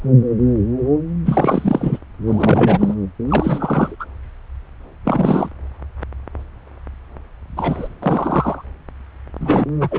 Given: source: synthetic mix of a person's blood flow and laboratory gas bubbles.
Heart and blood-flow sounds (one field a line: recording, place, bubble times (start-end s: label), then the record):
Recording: Doppler ultrasound of blood flow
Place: subclavian vein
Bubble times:
1.25-1.99 s: bubbles
2.27-2.94 s: bubbles
3.29-3.96 s: bubbles
3.99-4.05 s: bubbles
5.04-5.49 s: bubbles
7.56-7.88 s: bubbles
8.02-8.64 s: bubbles
9.40-9.66 s: bubbles
9.80-9.99 s: bubbles
From the record:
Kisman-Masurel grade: 333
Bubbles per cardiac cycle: rolling drumbeat, 9 or more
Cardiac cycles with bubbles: 50 to 99%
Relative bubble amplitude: loud (0.450 to 0.775)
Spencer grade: 3 (all of the cardiac periods contain showers or single bubble signals, but not dominating or overriding the cardiac motion signals)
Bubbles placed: anywhere in the cardiac cycle